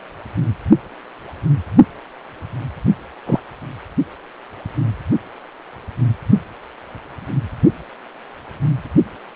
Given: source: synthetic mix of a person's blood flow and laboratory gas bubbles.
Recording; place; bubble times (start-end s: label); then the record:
Doppler ultrasound of blood flow; precordium
3.25-3.40 s: bubbles
From the record:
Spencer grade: 2 (many but less than half of the cardiac periods contain bubble signals, singularly or in groups); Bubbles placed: only in the low amplitude regions of the cardiac cycle